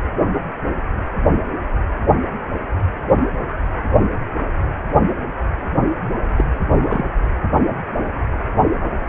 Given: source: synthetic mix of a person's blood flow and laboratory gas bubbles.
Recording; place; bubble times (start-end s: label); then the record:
Doppler ultrasound of blood flow; precordium
6.36-6.45 s: bubbles
6.81-7.09 s: bubbles
From the record:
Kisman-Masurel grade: 112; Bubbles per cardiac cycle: 1 to 2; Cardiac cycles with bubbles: 1 to 10%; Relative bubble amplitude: moderate (0.250 to 0.450); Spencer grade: 1 (occasional bubble signal discernible with the cardiac motion signal, with majority of cardiac periods free of bubbles); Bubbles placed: anywhere in the cardiac cycle